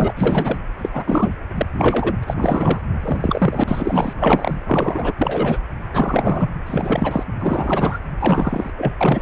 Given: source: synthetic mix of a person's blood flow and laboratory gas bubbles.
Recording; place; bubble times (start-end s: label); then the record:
Doppler ultrasound of blood flow; precordium
0.00-0.13 s: bubbles
0.16-0.57 s: bubbles
0.78-0.89 s: bubbles
0.93-1.37 s: bubbles
1.58-1.67 s: bubbles
1.74-2.16 s: bubbles
2.22-2.24 s: bubbles
2.27-2.79 s: bubbles
3.00-3.64 s: bubbles
3.67-4.13 s: bubbles
4.20-4.63 s: bubbles
4.67-5.13 s: bubbles
5.17-5.57 s: bubbles
5.92-6.55 s: bubbles
6.66-7.24 s: bubbles
7.39-7.99 s: bubbles
8.17-8.70 s: bubbles
8.76-8.92 s: bubbles
9.00-9.22 s: bubbles
From the record:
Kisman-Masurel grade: 343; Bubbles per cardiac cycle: rolling drumbeat, 9 or more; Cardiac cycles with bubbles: 100%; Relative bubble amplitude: loud (0.450 to 0.775); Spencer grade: 3 (all of the cardiac periods contain showers or single bubble signals, but not dominating or overriding the cardiac motion signals); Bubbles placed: anywhere in the cardiac cycle